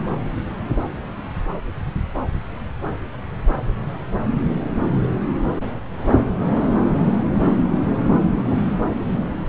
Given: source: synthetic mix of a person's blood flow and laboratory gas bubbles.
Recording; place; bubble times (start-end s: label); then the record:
Doppler ultrasound of blood flow; subclavian vein
no bubbles
From the record:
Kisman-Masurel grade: 000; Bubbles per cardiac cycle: 0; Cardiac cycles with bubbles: 0%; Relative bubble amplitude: no bubbles discernible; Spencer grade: 0 (complete lack of bubble signals)